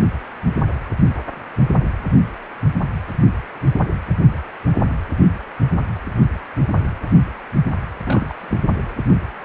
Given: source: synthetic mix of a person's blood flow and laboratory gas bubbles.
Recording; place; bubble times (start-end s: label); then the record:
Doppler ultrasound of blood flow; precordium
8.05-8.34 s: bubbles
8.41-8.75 s: bubbles
From the record:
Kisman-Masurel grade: 212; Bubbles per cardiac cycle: several, 3 to 8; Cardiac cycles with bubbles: 1 to 10%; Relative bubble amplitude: moderate (0.250 to 0.450); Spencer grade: 1 (occasional bubble signal discernible with the cardiac motion signal, with majority of cardiac periods free of bubbles); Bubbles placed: anywhere in the cardiac cycle